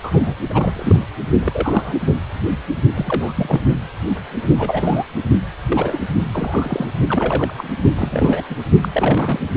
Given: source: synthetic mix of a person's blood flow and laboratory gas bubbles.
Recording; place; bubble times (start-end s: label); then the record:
Doppler ultrasound of blood flow; precordium
0.02-0.34 s: bubbles
0.50-1.04 s: bubbles
1.40-1.98 s: bubbles
2.94-3.33 s: bubbles
3.35-3.61 s: bubbles
4.58-5.04 s: bubbles
5.69-5.98 s: bubbles
6.31-6.94 s: bubbles
7.06-7.70 s: bubbles
7.96-8.44 s: bubbles
8.49-8.55 s: bubbles
8.82-8.88 s: bubbles
8.93-9.40 s: bubbles
From the record:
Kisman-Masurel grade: 232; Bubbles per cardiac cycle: several, 3 to 8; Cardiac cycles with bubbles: 50 to 99%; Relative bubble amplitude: moderate (0.250 to 0.450); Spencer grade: 3 (all of the cardiac periods contain showers or single bubble signals, but not dominating or overriding the cardiac motion signals); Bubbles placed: only in the low amplitude regions of the cardiac cycle